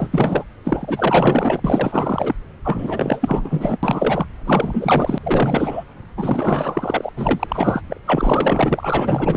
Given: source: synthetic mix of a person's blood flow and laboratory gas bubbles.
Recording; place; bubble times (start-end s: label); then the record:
Doppler ultrasound of blood flow; subclavian vein
0.00-0.44 s: bubbles
0.64-1.60 s: bubbles
1.64-2.35 s: bubbles
2.64-3.77 s: bubbles
3.82-4.26 s: bubbles
4.44-5.18 s: bubbles
5.23-5.84 s: bubbles
6.17-7.12 s: bubbles
7.17-7.81 s: bubbles
7.87-8.01 s: bubbles
8.06-9.37 s: bubbles
From the record:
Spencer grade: 4 (maximum detectable bubble signal sounding continuously throughout systole and diastole of every cardiac period, and overriding the amplitude of the normal cardiac signals); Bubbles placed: anywhere in the cardiac cycle